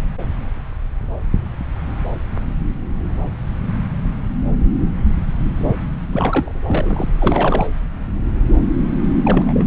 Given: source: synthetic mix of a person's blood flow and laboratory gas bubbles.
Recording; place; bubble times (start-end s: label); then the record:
Doppler ultrasound of blood flow; subclavian vein
6.12-6.53 s: bubbles
6.67-7.12 s: bubbles
7.18-7.67 s: bubbles
9.25-9.65 s: bubbles
From the record:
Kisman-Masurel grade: 222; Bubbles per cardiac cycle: several, 3 to 8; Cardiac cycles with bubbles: 10 to 50%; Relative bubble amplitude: moderate (0.250 to 0.450); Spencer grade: 2 (many but less than half of the cardiac periods contain bubble signals, singularly or in groups); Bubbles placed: anywhere in the cardiac cycle